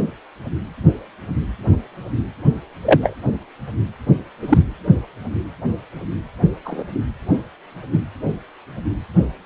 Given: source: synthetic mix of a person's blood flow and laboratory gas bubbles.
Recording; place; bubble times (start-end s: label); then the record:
Doppler ultrasound of blood flow; precordium
2.83-3.17 s: bubbles
4.42-4.63 s: bubbles
6.64-6.83 s: bubbles
7.93-7.99 s: bubbles
From the record:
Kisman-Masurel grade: 123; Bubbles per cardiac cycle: 1 to 2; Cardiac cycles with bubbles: 10 to 50%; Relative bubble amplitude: loud (0.450 to 0.775); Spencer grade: 2 (many but less than half of the cardiac periods contain bubble signals, singularly or in groups); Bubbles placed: only in the low amplitude regions of the cardiac cycle